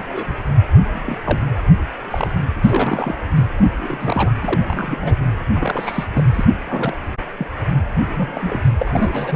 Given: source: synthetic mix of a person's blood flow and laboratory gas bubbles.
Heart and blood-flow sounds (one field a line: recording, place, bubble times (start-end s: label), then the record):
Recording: Doppler ultrasound of blood flow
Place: precordium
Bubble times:
0.00-0.40 s: bubbles
0.93-1.58 s: bubbles
2.10-2.32 s: bubbles
2.52-3.15 s: bubbles
3.36-3.46 s: bubbles
3.59-3.67 s: bubbles
3.78-4.33 s: bubbles
4.40-4.60 s: bubbles
4.66-5.16 s: bubbles
5.54-6.06 s: bubbles
6.13-6.23 s: bubbles
6.33-6.45 s: bubbles
6.69-6.97 s: bubbles
7.38-7.47 s: bubbles
8.05-8.61 s: bubbles
8.79-9.36 s: bubbles
From the record:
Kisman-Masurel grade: 242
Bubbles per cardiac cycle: several, 3 to 8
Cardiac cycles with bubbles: 100%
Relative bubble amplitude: moderate (0.250 to 0.450)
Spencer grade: 3 (all of the cardiac periods contain showers or single bubble signals, but not dominating or overriding the cardiac motion signals)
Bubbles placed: anywhere in the cardiac cycle